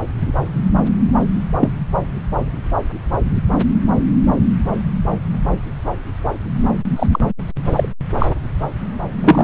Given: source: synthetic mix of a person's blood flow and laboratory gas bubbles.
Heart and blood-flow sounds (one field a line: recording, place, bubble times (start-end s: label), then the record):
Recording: Doppler ultrasound of blood flow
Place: subclavian vein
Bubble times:
1.60-1.72 s: bubbles
6.96-7.07 s: bubbles
7.12-7.19 s: bubbles
7.77-7.89 s: bubbles
8.19-8.26 s: bubbles
9.23-9.44 s: bubbles
From the record:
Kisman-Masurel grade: 123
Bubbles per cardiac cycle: 1 to 2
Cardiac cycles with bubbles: 10 to 50%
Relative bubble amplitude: loud (0.450 to 0.775)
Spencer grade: 2 (many but less than half of the cardiac periods contain bubble signals, singularly or in groups)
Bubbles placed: anywhere in the cardiac cycle